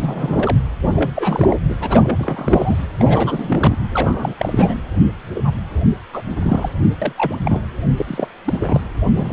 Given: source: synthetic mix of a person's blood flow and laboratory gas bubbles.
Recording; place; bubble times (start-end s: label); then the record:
Doppler ultrasound of blood flow; precordium
0.00-0.57 s: bubbles
0.87-1.11 s: bubbles
1.15-1.56 s: bubbles
1.68-1.76 s: bubbles
1.80-2.85 s: bubbles
2.99-3.77 s: bubbles
3.94-4.34 s: bubbles
4.38-4.81 s: bubbles
5.35-5.51 s: bubbles
5.82-5.91 s: bubbles
6.13-6.22 s: bubbles
6.32-6.73 s: bubbles
7.02-7.12 s: bubbles
7.17-7.37 s: bubbles
7.42-7.61 s: bubbles
7.97-8.28 s: bubbles
8.44-8.87 s: bubbles
9.14-9.33 s: bubbles
From the record:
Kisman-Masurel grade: 342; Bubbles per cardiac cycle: rolling drumbeat, 9 or more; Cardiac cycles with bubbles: 100%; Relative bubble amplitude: moderate (0.250 to 0.450); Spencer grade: 3 (all of the cardiac periods contain showers or single bubble signals, but not dominating or overriding the cardiac motion signals); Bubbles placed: anywhere in the cardiac cycle